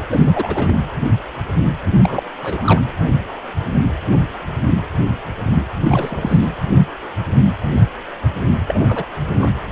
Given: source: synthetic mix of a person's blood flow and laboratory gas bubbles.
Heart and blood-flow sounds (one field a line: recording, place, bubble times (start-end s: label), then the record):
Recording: Doppler ultrasound of blood flow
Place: precordium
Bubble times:
0.07-0.74 s: bubbles
1.93-2.23 s: bubbles
2.42-2.81 s: bubbles
5.88-6.47 s: bubbles
8.67-9.04 s: bubbles
9.33-9.50 s: bubbles
From the record:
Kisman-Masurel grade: 222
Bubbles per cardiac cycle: several, 3 to 8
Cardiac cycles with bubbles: 10 to 50%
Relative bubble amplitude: moderate (0.250 to 0.450)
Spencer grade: 2 (many but less than half of the cardiac periods contain bubble signals, singularly or in groups)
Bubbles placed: anywhere in the cardiac cycle